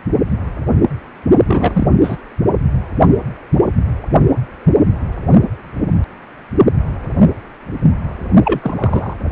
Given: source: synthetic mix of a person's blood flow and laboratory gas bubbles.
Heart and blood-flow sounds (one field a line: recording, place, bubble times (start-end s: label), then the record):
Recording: Doppler ultrasound of blood flow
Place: precordium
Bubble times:
1.46-1.88 s: bubbles
2.03-2.17 s: bubbles
8.44-8.60 s: bubbles
8.62-9.14 s: bubbles
From the record:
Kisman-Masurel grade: 223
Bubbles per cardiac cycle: several, 3 to 8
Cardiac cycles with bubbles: 10 to 50%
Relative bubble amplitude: loud (0.450 to 0.775)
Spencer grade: 2 (many but less than half of the cardiac periods contain bubble signals, singularly or in groups)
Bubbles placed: only in the low amplitude regions of the cardiac cycle